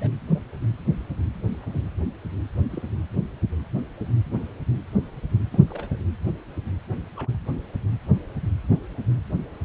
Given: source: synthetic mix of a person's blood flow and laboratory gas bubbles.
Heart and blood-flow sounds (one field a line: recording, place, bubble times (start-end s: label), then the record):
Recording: Doppler ultrasound of blood flow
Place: precordium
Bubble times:
0.00-0.10 s: bubbles
0.26-0.40 s: bubbles
1.51-1.57 s: bubbles
1.59-1.86 s: bubbles
2.69-2.83 s: bubbles
4.31-4.45 s: bubbles
5.45-5.59 s: bubbles
5.68-5.98 s: bubbles
7.16-7.36 s: bubbles
From the record:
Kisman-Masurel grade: 121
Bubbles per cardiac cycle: 1 to 2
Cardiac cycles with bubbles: 10 to 50%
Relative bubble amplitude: barely perceptible (0.100 to 0.250)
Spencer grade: 2 (many but less than half of the cardiac periods contain bubble signals, singularly or in groups)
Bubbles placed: anywhere in the cardiac cycle